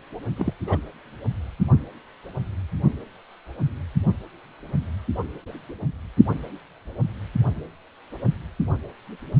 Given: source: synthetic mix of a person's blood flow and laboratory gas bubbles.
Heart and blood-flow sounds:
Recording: Doppler ultrasound of blood flow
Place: precordium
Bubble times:
0.36-0.54 s: bubbles
0.67-0.78 s: bubbles
From the record:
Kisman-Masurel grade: 211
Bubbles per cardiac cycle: several, 3 to 8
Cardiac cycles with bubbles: 1 to 10%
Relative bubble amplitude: barely perceptible (0.100 to 0.250)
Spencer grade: 1 (occasional bubble signal discernible with the cardiac motion signal, with majority of cardiac periods free of bubbles)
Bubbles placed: only in the low amplitude regions of the cardiac cycle

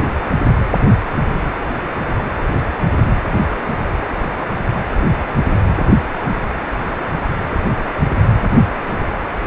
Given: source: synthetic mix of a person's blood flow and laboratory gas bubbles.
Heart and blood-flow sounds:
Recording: Doppler ultrasound of blood flow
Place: precordium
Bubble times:
no bubbles
From the record:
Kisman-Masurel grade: 000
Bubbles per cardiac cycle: 0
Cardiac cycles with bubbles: 0%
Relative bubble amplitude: no bubbles discernible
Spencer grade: 0 (complete lack of bubble signals)

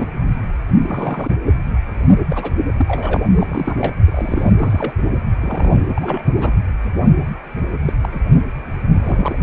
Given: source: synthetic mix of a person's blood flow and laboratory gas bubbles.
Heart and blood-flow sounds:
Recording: Doppler ultrasound of blood flow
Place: precordium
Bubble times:
0.00-0.13 s: bubbles
0.82-1.35 s: bubbles
2.29-2.53 s: bubbles
2.78-3.20 s: bubbles
3.33-3.93 s: bubbles
4.04-4.93 s: bubbles
5.41-5.83 s: bubbles
5.96-6.33 s: bubbles
6.36-6.54 s: bubbles
7.85-7.93 s: bubbles
8.03-8.09 s: bubbles
8.12-8.21 s: bubbles
8.93-9.36 s: bubbles
From the record:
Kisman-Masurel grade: 232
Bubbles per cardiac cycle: several, 3 to 8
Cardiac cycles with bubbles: 50 to 99%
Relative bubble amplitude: moderate (0.250 to 0.450)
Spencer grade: 3 (all of the cardiac periods contain showers or single bubble signals, but not dominating or overriding the cardiac motion signals)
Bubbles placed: anywhere in the cardiac cycle

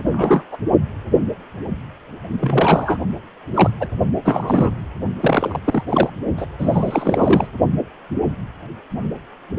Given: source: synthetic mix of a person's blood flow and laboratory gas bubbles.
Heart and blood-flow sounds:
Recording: Doppler ultrasound of blood flow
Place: precordium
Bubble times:
0.06-0.44 s: bubbles
0.52-0.58 s: bubbles
2.41-2.98 s: bubbles
3.54-3.70 s: bubbles
3.80-3.88 s: bubbles
4.25-4.79 s: bubbles
5.20-5.59 s: bubbles
5.64-5.83 s: bubbles
5.88-6.10 s: bubbles
6.37-6.46 s: bubbles
6.58-7.47 s: bubbles
From the record:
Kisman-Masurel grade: 333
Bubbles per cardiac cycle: rolling drumbeat, 9 or more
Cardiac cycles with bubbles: 50 to 99%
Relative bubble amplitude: loud (0.450 to 0.775)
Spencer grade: 3 (all of the cardiac periods contain showers or single bubble signals, but not dominating or overriding the cardiac motion signals)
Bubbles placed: only in the low amplitude regions of the cardiac cycle

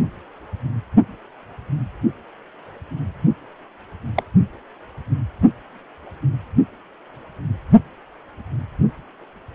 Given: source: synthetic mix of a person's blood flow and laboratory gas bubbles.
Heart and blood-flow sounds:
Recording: Doppler ultrasound of blood flow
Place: precordium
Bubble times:
4.16-4.23 s: bubbles
From the record:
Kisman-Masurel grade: 112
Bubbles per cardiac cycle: 1 to 2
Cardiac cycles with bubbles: 1 to 10%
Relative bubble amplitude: moderate (0.250 to 0.450)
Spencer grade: 1 (occasional bubble signal discernible with the cardiac motion signal, with majority of cardiac periods free of bubbles)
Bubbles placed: anywhere in the cardiac cycle

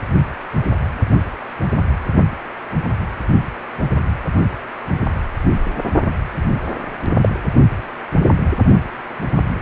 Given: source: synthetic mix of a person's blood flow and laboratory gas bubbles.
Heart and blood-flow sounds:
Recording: Doppler ultrasound of blood flow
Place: precordium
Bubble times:
7.21-7.29 s: bubbles
From the record:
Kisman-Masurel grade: 113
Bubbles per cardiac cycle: 1 to 2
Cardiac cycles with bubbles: 1 to 10%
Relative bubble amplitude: loud (0.450 to 0.775)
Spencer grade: 1 (occasional bubble signal discernible with the cardiac motion signal, with majority of cardiac periods free of bubbles)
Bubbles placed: anywhere in the cardiac cycle

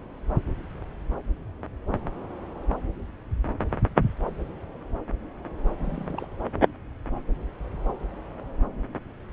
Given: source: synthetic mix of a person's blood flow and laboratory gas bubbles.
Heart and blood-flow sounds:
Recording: Doppler ultrasound of blood flow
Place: subclavian vein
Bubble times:
5.78-6.26 s: bubbles
From the record:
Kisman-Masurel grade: 211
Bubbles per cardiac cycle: several, 3 to 8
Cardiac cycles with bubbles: 1 to 10%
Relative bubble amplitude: barely perceptible (0.100 to 0.250)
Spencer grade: 1 (occasional bubble signal discernible with the cardiac motion signal, with majority of cardiac periods free of bubbles)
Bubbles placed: anywhere in the cardiac cycle

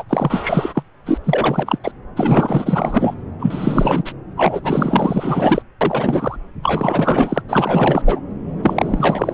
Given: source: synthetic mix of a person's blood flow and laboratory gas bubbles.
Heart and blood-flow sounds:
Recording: Doppler ultrasound of blood flow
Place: subclavian vein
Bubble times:
0.00-0.04 s: bubbles
0.09-0.82 s: bubbles
1.05-1.18 s: bubbles
1.24-1.78 s: bubbles
1.83-1.91 s: bubbles
2.16-3.14 s: bubbles
3.40-4.12 s: bubbles
4.37-4.61 s: bubbles
4.63-5.62 s: bubbles
5.81-6.37 s: bubbles
6.63-7.42 s: bubbles
7.49-8.02 s: bubbles
8.05-8.19 s: bubbles
8.62-9.33 s: bubbles
From the record:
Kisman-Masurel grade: 444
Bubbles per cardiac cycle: continuous sound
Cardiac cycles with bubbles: 100%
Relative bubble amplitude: maximal (0.775 to 0.999)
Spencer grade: 4 (maximum detectable bubble signal sounding continuously throughout systole and diastole of every cardiac period, and overriding the amplitude of the normal cardiac signals)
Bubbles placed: anywhere in the cardiac cycle

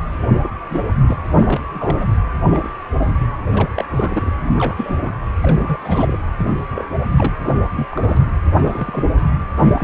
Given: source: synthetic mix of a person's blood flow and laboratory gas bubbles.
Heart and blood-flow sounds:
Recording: Doppler ultrasound of blood flow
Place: precordium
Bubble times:
0.20-0.49 s: bubbles
0.68-0.93 s: bubbles
0.99-1.17 s: bubbles
1.35-1.60 s: bubbles
1.72-2.06 s: bubbles
2.49-2.70 s: bubbles
2.95-3.27 s: bubbles
3.45-3.70 s: bubbles
3.77-3.85 s: bubbles
3.90-4.32 s: bubbles
4.53-5.13 s: bubbles
5.42-5.77 s: bubbles
5.80-6.18 s: bubbles
6.37-6.53 s: bubbles
6.75-6.84 s: bubbles
7.07-7.33 s: bubbles
7.45-7.63 s: bubbles
7.71-7.86 s: bubbles
7.89-8.31 s: bubbles
8.55-9.04 s: bubbles
9.56-9.84 s: bubbles
From the record:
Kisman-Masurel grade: 242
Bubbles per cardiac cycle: several, 3 to 8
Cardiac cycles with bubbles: 100%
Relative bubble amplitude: moderate (0.250 to 0.450)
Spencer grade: 3 (all of the cardiac periods contain showers or single bubble signals, but not dominating or overriding the cardiac motion signals)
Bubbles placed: anywhere in the cardiac cycle

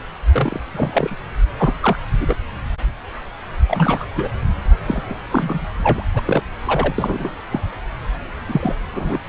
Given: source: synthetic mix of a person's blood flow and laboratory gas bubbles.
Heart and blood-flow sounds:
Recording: Doppler ultrasound of blood flow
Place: subclavian vein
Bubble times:
0.32-0.60 s: bubbles
0.72-1.16 s: bubbles
1.57-1.74 s: bubbles
1.81-1.99 s: bubbles
2.21-2.35 s: bubbles
3.66-4.05 s: bubbles
4.16-4.31 s: bubbles
4.82-5.17 s: bubbles
5.30-5.67 s: bubbles
5.82-6.03 s: bubbles
6.14-6.21 s: bubbles
6.26-6.42 s: bubbles
6.64-6.94 s: bubbles
6.98-7.30 s: bubbles
7.50-7.60 s: bubbles
8.48-8.76 s: bubbles
8.92-9.19 s: bubbles
From the record:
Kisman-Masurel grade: 232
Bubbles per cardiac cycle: several, 3 to 8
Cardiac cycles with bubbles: 50 to 99%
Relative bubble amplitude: moderate (0.250 to 0.450)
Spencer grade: 3 (all of the cardiac periods contain showers or single bubble signals, but not dominating or overriding the cardiac motion signals)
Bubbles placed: anywhere in the cardiac cycle

